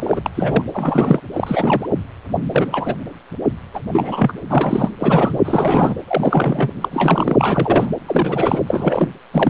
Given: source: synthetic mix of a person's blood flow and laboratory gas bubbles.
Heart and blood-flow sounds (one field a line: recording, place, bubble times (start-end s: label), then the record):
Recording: Doppler ultrasound of blood flow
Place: precordium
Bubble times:
0.00-0.21 s: bubbles
0.26-0.30 s: bubbles
0.35-0.62 s: bubbles
0.73-1.20 s: bubbles
1.32-1.86 s: bubbles
2.53-2.97 s: bubbles
3.74-3.80 s: bubbles
3.92-4.33 s: bubbles
4.49-4.91 s: bubbles
5.01-5.39 s: bubbles
5.45-5.96 s: bubbles
6.08-6.71 s: bubbles
6.81-6.88 s: bubbles
6.91-7.91 s: bubbles
8.06-8.62 s: bubbles
8.66-9.10 s: bubbles
9.31-9.50 s: bubbles
From the record:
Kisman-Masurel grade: 333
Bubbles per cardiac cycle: rolling drumbeat, 9 or more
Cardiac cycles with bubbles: 50 to 99%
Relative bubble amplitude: loud (0.450 to 0.775)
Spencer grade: 3 (all of the cardiac periods contain showers or single bubble signals, but not dominating or overriding the cardiac motion signals)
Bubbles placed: anywhere in the cardiac cycle